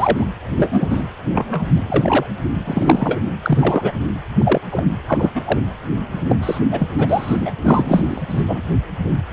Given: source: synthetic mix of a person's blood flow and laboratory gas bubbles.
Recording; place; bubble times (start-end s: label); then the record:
Doppler ultrasound of blood flow; precordium
0.00-0.28 s: bubbles
0.57-0.88 s: bubbles
0.90-1.04 s: bubbles
1.32-1.67 s: bubbles
1.77-2.26 s: bubbles
2.64-3.19 s: bubbles
3.42-3.93 s: bubbles
4.38-4.61 s: bubbles
4.71-4.85 s: bubbles
5.07-5.31 s: bubbles
5.35-5.42 s: bubbles
5.45-5.60 s: bubbles
6.14-6.21 s: bubbles
6.29-6.36 s: bubbles
6.43-6.59 s: bubbles
6.71-6.88 s: bubbles
6.97-7.07 s: bubbles
7.09-7.52 s: bubbles
7.64-8.21 s: bubbles
8.29-8.62 s: bubbles
From the record:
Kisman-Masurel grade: 243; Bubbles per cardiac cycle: several, 3 to 8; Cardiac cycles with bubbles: 100%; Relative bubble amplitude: loud (0.450 to 0.775); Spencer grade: 3 (all of the cardiac periods contain showers or single bubble signals, but not dominating or overriding the cardiac motion signals); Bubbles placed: anywhere in the cardiac cycle